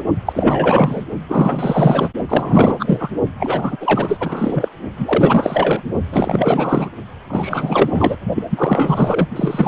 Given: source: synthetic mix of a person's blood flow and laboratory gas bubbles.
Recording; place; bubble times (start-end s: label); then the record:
Doppler ultrasound of blood flow; precordium
0.26-1.05 s: bubbles
1.29-2.09 s: bubbles
2.28-3.10 s: bubbles
3.40-3.76 s: bubbles
3.80-4.68 s: bubbles
4.96-5.82 s: bubbles
6.12-6.90 s: bubbles
7.29-8.16 s: bubbles
8.35-8.43 s: bubbles
8.50-9.28 s: bubbles
9.36-9.68 s: bubbles
From the record:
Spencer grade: 4 (maximum detectable bubble signal sounding continuously throughout systole and diastole of every cardiac period, and overriding the amplitude of the normal cardiac signals); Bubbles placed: only in the low amplitude regions of the cardiac cycle